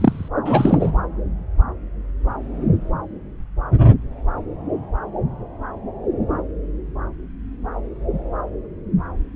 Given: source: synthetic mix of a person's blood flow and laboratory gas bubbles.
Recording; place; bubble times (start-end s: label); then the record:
Doppler ultrasound of blood flow; subclavian vein
0.00-0.28 s: bubbles
0.45-0.92 s: bubbles
From the record:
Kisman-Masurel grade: 213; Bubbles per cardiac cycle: several, 3 to 8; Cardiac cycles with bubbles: 1 to 10%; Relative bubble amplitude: loud (0.450 to 0.775); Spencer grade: 1 (occasional bubble signal discernible with the cardiac motion signal, with majority of cardiac periods free of bubbles); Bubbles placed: anywhere in the cardiac cycle